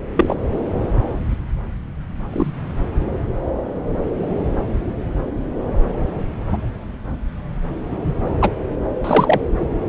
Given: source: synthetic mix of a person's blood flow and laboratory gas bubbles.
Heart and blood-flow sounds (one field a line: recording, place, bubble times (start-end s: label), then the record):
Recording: Doppler ultrasound of blood flow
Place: subclavian vein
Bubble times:
0.15-0.35 s: bubbles
2.33-2.51 s: bubbles
6.52-6.57 s: bubbles
8.26-8.31 s: bubbles
8.41-8.50 s: bubbles
9.04-9.41 s: bubbles
From the record:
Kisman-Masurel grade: 123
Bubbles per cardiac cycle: 1 to 2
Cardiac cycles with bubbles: 10 to 50%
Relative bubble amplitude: loud (0.450 to 0.775)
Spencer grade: 2 (many but less than half of the cardiac periods contain bubble signals, singularly or in groups)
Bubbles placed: anywhere in the cardiac cycle